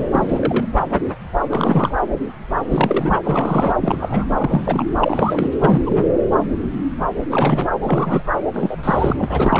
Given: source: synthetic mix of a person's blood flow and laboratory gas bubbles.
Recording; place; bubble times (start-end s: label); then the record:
Doppler ultrasound of blood flow; subclavian vein
0.00-0.03 s: bubbles
0.11-0.66 s: bubbles
1.49-1.94 s: bubbles
2.71-3.21 s: bubbles
3.23-3.74 s: bubbles
3.81-4.25 s: bubbles
4.38-4.86 s: bubbles
5.00-5.50 s: bubbles
5.62-5.83 s: bubbles
5.86-6.05 s: bubbles
7.30-7.69 s: bubbles
7.82-8.23 s: bubbles
8.53-8.76 s: bubbles
8.83-9.13 s: bubbles
9.19-9.60 s: bubbles
From the record:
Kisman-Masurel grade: 332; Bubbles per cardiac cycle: rolling drumbeat, 9 or more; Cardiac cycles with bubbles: 50 to 99%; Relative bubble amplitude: moderate (0.250 to 0.450); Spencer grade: 3 (all of the cardiac periods contain showers or single bubble signals, but not dominating or overriding the cardiac motion signals); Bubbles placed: anywhere in the cardiac cycle